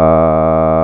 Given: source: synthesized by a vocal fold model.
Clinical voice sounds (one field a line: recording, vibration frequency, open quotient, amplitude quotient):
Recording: sustained vowel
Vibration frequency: 80 Hz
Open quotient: 0.3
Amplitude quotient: 1